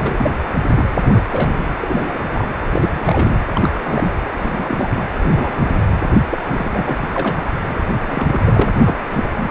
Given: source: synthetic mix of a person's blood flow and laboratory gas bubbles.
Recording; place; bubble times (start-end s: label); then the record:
Doppler ultrasound of blood flow; precordium
0.00-0.31 s: bubbles
0.75-1.22 s: bubbles
1.31-1.55 s: bubbles
1.58-1.68 s: bubbles
1.80-2.24 s: bubbles
2.30-2.48 s: bubbles
2.64-3.38 s: bubbles
3.54-3.69 s: bubbles
3.84-4.14 s: bubbles
4.37-5.01 s: bubbles
5.23-5.77 s: bubbles
5.79-5.87 s: bubbles
6.31-6.38 s: bubbles
6.44-7.07 s: bubbles
7.15-7.48 s: bubbles
7.64-7.75 s: bubbles
8.05-8.72 s: bubbles
8.83-8.97 s: bubbles
9.14-9.31 s: bubbles
9.35-9.50 s: bubbles
From the record:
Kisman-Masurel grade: 242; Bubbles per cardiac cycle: several, 3 to 8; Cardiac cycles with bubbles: 100%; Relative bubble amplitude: moderate (0.250 to 0.450); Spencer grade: 3 (all of the cardiac periods contain showers or single bubble signals, but not dominating or overriding the cardiac motion signals); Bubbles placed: anywhere in the cardiac cycle